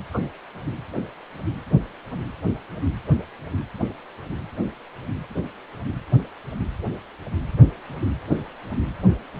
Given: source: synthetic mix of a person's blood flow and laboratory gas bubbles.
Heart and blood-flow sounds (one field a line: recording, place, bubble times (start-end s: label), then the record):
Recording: Doppler ultrasound of blood flow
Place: precordium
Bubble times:
0.13-0.18 s: bubbles
From the record:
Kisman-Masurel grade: 112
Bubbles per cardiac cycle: 1 to 2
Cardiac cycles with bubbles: 1 to 10%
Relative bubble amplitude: moderate (0.250 to 0.450)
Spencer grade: 1 (occasional bubble signal discernible with the cardiac motion signal, with majority of cardiac periods free of bubbles)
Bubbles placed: anywhere in the cardiac cycle